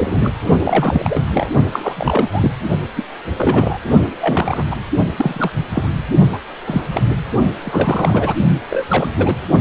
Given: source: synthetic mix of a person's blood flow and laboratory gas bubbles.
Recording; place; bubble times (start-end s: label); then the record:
Doppler ultrasound of blood flow; precordium
0.00-0.30 s: bubbles
0.58-1.22 s: bubbles
1.34-1.50 s: bubbles
1.71-2.30 s: bubbles
2.32-2.51 s: bubbles
2.96-3.04 s: bubbles
3.37-3.78 s: bubbles
4.21-4.64 s: bubbles
4.71-4.77 s: bubbles
5.17-5.51 s: bubbles
5.72-5.88 s: bubbles
6.33-6.38 s: bubbles
6.67-6.82 s: bubbles
6.94-7.02 s: bubbles
7.64-8.34 s: bubbles
8.70-8.84 s: bubbles
8.88-9.08 s: bubbles
9.16-9.34 s: bubbles
From the record:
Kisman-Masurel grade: 242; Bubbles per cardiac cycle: several, 3 to 8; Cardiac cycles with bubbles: 100%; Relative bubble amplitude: moderate (0.250 to 0.450); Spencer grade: 3 (all of the cardiac periods contain showers or single bubble signals, but not dominating or overriding the cardiac motion signals); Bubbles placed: only in the low amplitude regions of the cardiac cycle